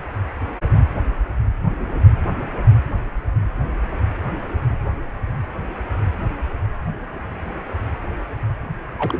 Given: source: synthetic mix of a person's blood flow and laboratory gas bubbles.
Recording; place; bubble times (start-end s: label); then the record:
Doppler ultrasound of blood flow; precordium
8.98-9.20 s: bubbles
From the record:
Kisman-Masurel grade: 212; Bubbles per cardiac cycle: several, 3 to 8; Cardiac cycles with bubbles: 1 to 10%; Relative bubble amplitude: moderate (0.250 to 0.450); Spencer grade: 1 (occasional bubble signal discernible with the cardiac motion signal, with majority of cardiac periods free of bubbles); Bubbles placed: anywhere in the cardiac cycle